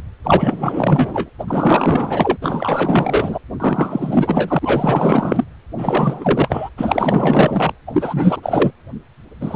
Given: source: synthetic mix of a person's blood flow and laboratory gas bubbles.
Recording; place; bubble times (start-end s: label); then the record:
Doppler ultrasound of blood flow; precordium
0.23-1.29 s: bubbles
1.39-1.44 s: bubbles
1.47-2.37 s: bubbles
2.42-3.39 s: bubbles
3.60-5.44 s: bubbles
5.78-6.69 s: bubbles
6.77-7.74 s: bubbles
7.87-8.71 s: bubbles
9.40-9.56 s: bubbles
From the record:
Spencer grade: 4 (maximum detectable bubble signal sounding continuously throughout systole and diastole of every cardiac period, and overriding the amplitude of the normal cardiac signals); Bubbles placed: anywhere in the cardiac cycle